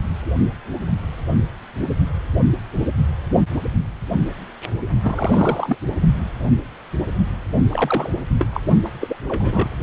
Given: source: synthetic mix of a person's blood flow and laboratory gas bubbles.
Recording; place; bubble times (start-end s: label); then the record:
Doppler ultrasound of blood flow; precordium
5.03-5.76 s: bubbles
7.70-8.10 s: bubbles
8.39-8.46 s: bubbles
8.53-8.61 s: bubbles
8.84-8.88 s: bubbles
9.01-9.16 s: bubbles
9.23-9.68 s: bubbles
From the record:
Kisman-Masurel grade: 222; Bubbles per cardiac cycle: several, 3 to 8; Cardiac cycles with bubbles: 10 to 50%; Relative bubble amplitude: moderate (0.250 to 0.450); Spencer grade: 2 (many but less than half of the cardiac periods contain bubble signals, singularly or in groups); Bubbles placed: only in the low amplitude regions of the cardiac cycle